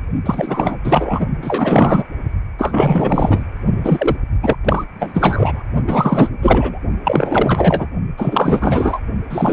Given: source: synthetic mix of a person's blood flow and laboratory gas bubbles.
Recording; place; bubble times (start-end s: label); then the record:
Doppler ultrasound of blood flow; precordium
0.26-0.77 s: bubbles
0.84-1.25 s: bubbles
1.42-2.04 s: bubbles
2.58-3.44 s: bubbles
3.84-4.17 s: bubbles
4.42-4.55 s: bubbles
4.65-4.84 s: bubbles
4.99-5.62 s: bubbles
5.87-6.29 s: bubbles
6.42-6.79 s: bubbles
7.04-7.88 s: bubbles
8.17-9.00 s: bubbles
9.29-9.53 s: bubbles
From the record:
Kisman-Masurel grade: 444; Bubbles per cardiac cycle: continuous sound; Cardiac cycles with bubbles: 100%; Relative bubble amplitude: maximal (0.775 to 0.999); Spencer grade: 4 (maximum detectable bubble signal sounding continuously throughout systole and diastole of every cardiac period, and overriding the amplitude of the normal cardiac signals); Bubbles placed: only in the low amplitude regions of the cardiac cycle